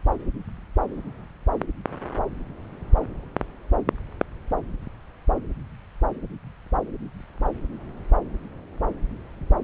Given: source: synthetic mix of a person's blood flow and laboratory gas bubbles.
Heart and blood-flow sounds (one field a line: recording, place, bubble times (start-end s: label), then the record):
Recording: Doppler ultrasound of blood flow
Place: subclavian vein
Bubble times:
no bubbles
From the record:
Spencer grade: 0 (complete lack of bubble signals)